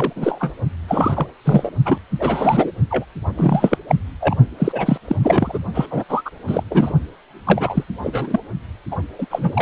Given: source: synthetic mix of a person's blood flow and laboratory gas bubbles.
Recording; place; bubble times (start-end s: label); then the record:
Doppler ultrasound of blood flow; precordium
0.00-0.13 s: bubbles
0.16-0.52 s: bubbles
0.88-1.27 s: bubbles
1.45-1.70 s: bubbles
1.85-1.98 s: bubbles
2.20-2.71 s: bubbles
2.91-3.05 s: bubbles
3.37-3.77 s: bubbles
3.88-3.95 s: bubbles
4.20-4.35 s: bubbles
4.58-4.97 s: bubbles
5.07-5.15 s: bubbles
5.23-5.58 s: bubbles
5.74-5.86 s: bubbles
5.90-6.04 s: bubbles
6.08-6.21 s: bubbles
6.25-6.30 s: bubbles
6.46-6.63 s: bubbles
6.70-6.92 s: bubbles
7.46-7.84 s: bubbles
8.04-8.40 s: bubbles
8.91-8.97 s: bubbles
9.19-9.26 s: bubbles
9.30-9.62 s: bubbles
From the record:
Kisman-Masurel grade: 343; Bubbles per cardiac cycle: rolling drumbeat, 9 or more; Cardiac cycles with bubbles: 100%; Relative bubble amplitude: loud (0.450 to 0.775); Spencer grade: 3 (all of the cardiac periods contain showers or single bubble signals, but not dominating or overriding the cardiac motion signals); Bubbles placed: only in the low amplitude regions of the cardiac cycle